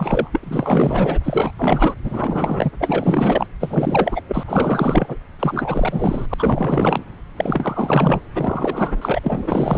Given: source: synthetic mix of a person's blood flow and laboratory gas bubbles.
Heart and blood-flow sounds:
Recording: Doppler ultrasound of blood flow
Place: subclavian vein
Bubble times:
0.00-1.19 s: bubbles
1.23-1.53 s: bubbles
1.57-1.94 s: bubbles
2.04-2.71 s: bubbles
2.79-3.46 s: bubbles
3.60-4.21 s: bubbles
4.28-5.17 s: bubbles
5.39-6.26 s: bubbles
6.29-6.34 s: bubbles
6.38-7.03 s: bubbles
7.35-8.21 s: bubbles
8.33-9.19 s: bubbles
9.22-9.78 s: bubbles
From the record:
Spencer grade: 4 (maximum detectable bubble signal sounding continuously throughout systole and diastole of every cardiac period, and overriding the amplitude of the normal cardiac signals)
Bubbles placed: anywhere in the cardiac cycle

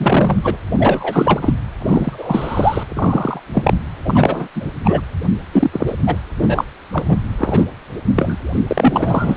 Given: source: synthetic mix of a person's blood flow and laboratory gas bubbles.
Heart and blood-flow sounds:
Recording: Doppler ultrasound of blood flow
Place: precordium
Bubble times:
0.00-0.39 s: bubbles
0.42-0.56 s: bubbles
0.78-1.53 s: bubbles
1.79-2.83 s: bubbles
2.89-3.40 s: bubbles
3.53-3.74 s: bubbles
4.05-4.48 s: bubbles
4.55-4.66 s: bubbles
4.84-5.00 s: bubbles
5.52-5.95 s: bubbles
6.06-6.16 s: bubbles
6.38-6.65 s: bubbles
6.94-7.17 s: bubbles
7.38-7.65 s: bubbles
8.16-8.38 s: bubbles
8.54-8.60 s: bubbles
8.67-9.36 s: bubbles
From the record:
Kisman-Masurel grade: 243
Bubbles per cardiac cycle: several, 3 to 8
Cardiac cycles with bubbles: 100%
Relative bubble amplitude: loud (0.450 to 0.775)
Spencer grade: 3 (all of the cardiac periods contain showers or single bubble signals, but not dominating or overriding the cardiac motion signals)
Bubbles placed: anywhere in the cardiac cycle

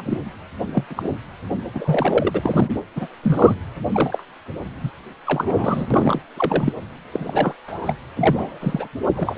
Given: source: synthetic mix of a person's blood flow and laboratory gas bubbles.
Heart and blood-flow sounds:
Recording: Doppler ultrasound of blood flow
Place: precordium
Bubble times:
0.00-0.02 s: bubbles
0.05-0.20 s: bubbles
0.73-0.84 s: bubbles
0.90-1.10 s: bubbles
1.74-2.80 s: bubbles
2.96-3.07 s: bubbles
3.22-3.55 s: bubbles
3.92-4.23 s: bubbles
4.83-4.91 s: bubbles
5.25-5.88 s: bubbles
5.90-6.21 s: bubbles
6.37-6.73 s: bubbles
7.12-7.54 s: bubbles
7.67-7.93 s: bubbles
8.16-8.88 s: bubbles
9.16-9.37 s: bubbles
From the record:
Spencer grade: 3 (all of the cardiac periods contain showers or single bubble signals, but not dominating or overriding the cardiac motion signals)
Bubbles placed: anywhere in the cardiac cycle

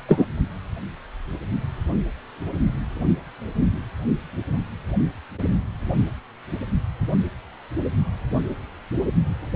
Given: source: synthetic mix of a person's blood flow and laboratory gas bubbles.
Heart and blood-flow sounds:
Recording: Doppler ultrasound of blood flow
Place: precordium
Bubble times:
0.09-0.26 s: bubbles
From the record:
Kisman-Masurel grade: 113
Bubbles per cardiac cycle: 1 to 2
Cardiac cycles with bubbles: 1 to 10%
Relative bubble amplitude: loud (0.450 to 0.775)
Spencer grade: 1 (occasional bubble signal discernible with the cardiac motion signal, with majority of cardiac periods free of bubbles)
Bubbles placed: only in the low amplitude regions of the cardiac cycle

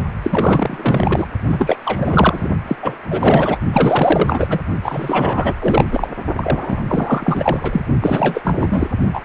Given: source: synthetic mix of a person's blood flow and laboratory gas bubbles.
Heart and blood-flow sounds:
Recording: Doppler ultrasound of blood flow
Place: precordium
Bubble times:
0.23-1.27 s: bubbles
1.47-1.77 s: bubbles
1.85-2.48 s: bubbles
2.67-2.75 s: bubbles
2.82-2.98 s: bubbles
3.09-3.58 s: bubbles
3.72-4.59 s: bubbles
4.83-5.54 s: bubbles
5.59-5.88 s: bubbles
5.91-6.09 s: bubbles
6.35-6.83 s: bubbles
6.87-7.82 s: bubbles
8.01-8.88 s: bubbles
9.13-9.22 s: bubbles
From the record:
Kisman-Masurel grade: 444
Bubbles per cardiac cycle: continuous sound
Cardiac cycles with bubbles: 100%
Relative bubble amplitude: maximal (0.775 to 0.999)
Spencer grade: 4 (maximum detectable bubble signal sounding continuously throughout systole and diastole of every cardiac period, and overriding the amplitude of the normal cardiac signals)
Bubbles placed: only in the low amplitude regions of the cardiac cycle

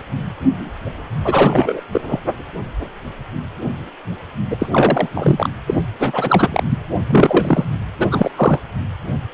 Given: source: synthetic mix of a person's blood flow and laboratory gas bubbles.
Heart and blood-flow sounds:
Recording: Doppler ultrasound of blood flow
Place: precordium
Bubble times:
1.23-1.81 s: bubbles
1.92-2.01 s: bubbles
2.08-2.19 s: bubbles
4.50-4.68 s: bubbles
4.71-5.09 s: bubbles
5.14-5.50 s: bubbles
5.67-5.86 s: bubbles
5.99-6.64 s: bubbles
6.70-6.77 s: bubbles
7.10-7.72 s: bubbles
8.00-8.31 s: bubbles
8.36-8.60 s: bubbles
From the record:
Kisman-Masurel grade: 333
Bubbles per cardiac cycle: rolling drumbeat, 9 or more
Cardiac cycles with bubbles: 50 to 99%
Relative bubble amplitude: loud (0.450 to 0.775)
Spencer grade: 3 (all of the cardiac periods contain showers or single bubble signals, but not dominating or overriding the cardiac motion signals)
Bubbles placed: anywhere in the cardiac cycle

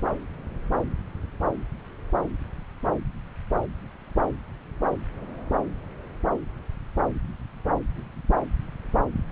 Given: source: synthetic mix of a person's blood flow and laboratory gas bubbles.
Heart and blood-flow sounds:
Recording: Doppler ultrasound of blood flow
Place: subclavian vein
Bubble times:
no bubbles
From the record:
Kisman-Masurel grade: 000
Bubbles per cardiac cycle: 0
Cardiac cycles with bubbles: 0%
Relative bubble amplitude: no bubbles discernible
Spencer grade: 0 (complete lack of bubble signals)

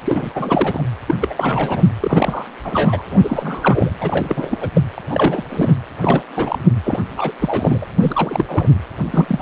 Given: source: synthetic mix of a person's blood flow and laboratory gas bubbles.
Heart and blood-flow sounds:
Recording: Doppler ultrasound of blood flow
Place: precordium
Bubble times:
0.04-0.32 s: bubbles
0.35-0.82 s: bubbles
1.06-1.15 s: bubbles
1.20-1.34 s: bubbles
1.37-1.83 s: bubbles
2.00-2.46 s: bubbles
2.63-3.04 s: bubbles
3.11-3.20 s: bubbles
3.23-3.91 s: bubbles
4.00-4.69 s: bubbles
4.75-4.81 s: bubbles
4.98-5.01 s: bubbles
5.10-5.44 s: bubbles
5.50-5.72 s: bubbles
6.01-6.23 s: bubbles
6.36-6.58 s: bubbles
6.83-7.00 s: bubbles
7.17-7.32 s: bubbles
7.39-7.87 s: bubbles
8.00-8.46 s: bubbles
8.48-8.67 s: bubbles
9.10-9.42 s: bubbles
From the record:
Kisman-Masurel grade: 343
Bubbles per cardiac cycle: rolling drumbeat, 9 or more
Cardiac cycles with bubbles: 100%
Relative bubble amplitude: loud (0.450 to 0.775)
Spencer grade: 3 (all of the cardiac periods contain showers or single bubble signals, but not dominating or overriding the cardiac motion signals)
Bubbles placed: anywhere in the cardiac cycle

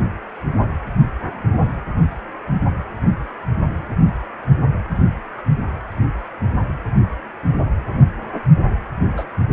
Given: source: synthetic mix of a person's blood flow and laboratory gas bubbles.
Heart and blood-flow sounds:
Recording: Doppler ultrasound of blood flow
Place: precordium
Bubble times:
9.17-9.24 s: bubbles
From the record:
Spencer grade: 2 (many but less than half of the cardiac periods contain bubble signals, singularly or in groups)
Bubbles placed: anywhere in the cardiac cycle

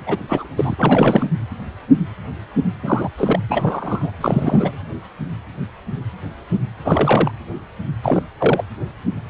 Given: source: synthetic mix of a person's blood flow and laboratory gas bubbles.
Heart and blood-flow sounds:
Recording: Doppler ultrasound of blood flow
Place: precordium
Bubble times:
0.07-0.18 s: bubbles
0.29-0.47 s: bubbles
0.57-0.76 s: bubbles
0.79-1.27 s: bubbles
2.82-3.09 s: bubbles
3.17-3.39 s: bubbles
3.48-4.12 s: bubbles
4.20-4.75 s: bubbles
6.85-7.31 s: bubbles
8.03-8.23 s: bubbles
8.39-8.64 s: bubbles
From the record:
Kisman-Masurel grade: 232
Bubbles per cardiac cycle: several, 3 to 8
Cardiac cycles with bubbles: 50 to 99%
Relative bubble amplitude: moderate (0.250 to 0.450)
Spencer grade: 3 (all of the cardiac periods contain showers or single bubble signals, but not dominating or overriding the cardiac motion signals)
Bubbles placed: anywhere in the cardiac cycle

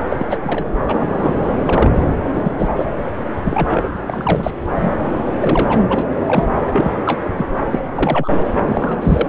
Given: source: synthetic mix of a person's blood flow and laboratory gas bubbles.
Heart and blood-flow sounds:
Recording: Doppler ultrasound of blood flow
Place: subclavian vein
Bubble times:
0.09-0.26 s: bubbles
0.30-0.38 s: bubbles
0.43-0.65 s: bubbles
0.84-1.39 s: bubbles
1.65-1.91 s: bubbles
1.94-2.05 s: bubbles
2.24-2.51 s: bubbles
2.57-2.69 s: bubbles
2.75-2.85 s: bubbles
3.44-3.88 s: bubbles
4.06-4.55 s: bubbles
4.74-4.94 s: bubbles
5.40-5.83 s: bubbles
5.90-6.07 s: bubbles
6.27-6.45 s: bubbles
6.73-6.92 s: bubbles
6.96-7.02 s: bubbles
7.05-7.21 s: bubbles
7.37-7.46 s: bubbles
7.70-7.79 s: bubbles
7.94-8.35 s: bubbles
8.69-9.27 s: bubbles
From the record:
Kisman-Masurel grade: 242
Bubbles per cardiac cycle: several, 3 to 8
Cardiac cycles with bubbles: 100%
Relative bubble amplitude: moderate (0.250 to 0.450)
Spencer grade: 3 (all of the cardiac periods contain showers or single bubble signals, but not dominating or overriding the cardiac motion signals)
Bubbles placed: anywhere in the cardiac cycle

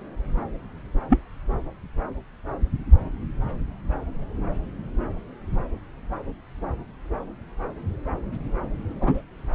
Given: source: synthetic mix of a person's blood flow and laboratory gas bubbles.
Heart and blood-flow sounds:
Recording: Doppler ultrasound of blood flow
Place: subclavian vein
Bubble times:
1.09-1.19 s: bubbles
8.90-9.22 s: bubbles
From the record:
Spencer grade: 2 (many but less than half of the cardiac periods contain bubble signals, singularly or in groups)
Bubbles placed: anywhere in the cardiac cycle

